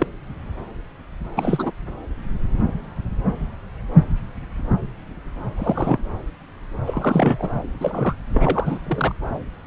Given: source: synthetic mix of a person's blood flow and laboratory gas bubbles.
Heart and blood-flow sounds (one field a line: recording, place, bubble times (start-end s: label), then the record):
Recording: Doppler ultrasound of blood flow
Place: subclavian vein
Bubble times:
0.00-0.07 s: bubbles
1.36-1.72 s: bubbles
5.56-5.98 s: bubbles
6.86-7.49 s: bubbles
7.80-8.15 s: bubbles
8.34-8.79 s: bubbles
8.87-9.15 s: bubbles
From the record:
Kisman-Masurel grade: 222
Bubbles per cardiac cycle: several, 3 to 8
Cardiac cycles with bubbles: 10 to 50%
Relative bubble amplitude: moderate (0.250 to 0.450)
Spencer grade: 2 (many but less than half of the cardiac periods contain bubble signals, singularly or in groups)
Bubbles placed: anywhere in the cardiac cycle